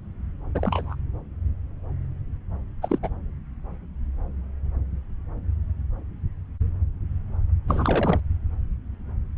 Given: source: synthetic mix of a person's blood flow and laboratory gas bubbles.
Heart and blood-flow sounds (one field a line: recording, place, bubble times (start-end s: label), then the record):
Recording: Doppler ultrasound of blood flow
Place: subclavian vein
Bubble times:
0.54-0.95 s: bubbles
2.82-2.99 s: bubbles
3.03-3.10 s: bubbles
7.68-8.20 s: bubbles
From the record:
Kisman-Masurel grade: 221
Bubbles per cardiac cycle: several, 3 to 8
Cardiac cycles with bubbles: 10 to 50%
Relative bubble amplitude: barely perceptible (0.100 to 0.250)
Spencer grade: 2 (many but less than half of the cardiac periods contain bubble signals, singularly or in groups)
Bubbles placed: anywhere in the cardiac cycle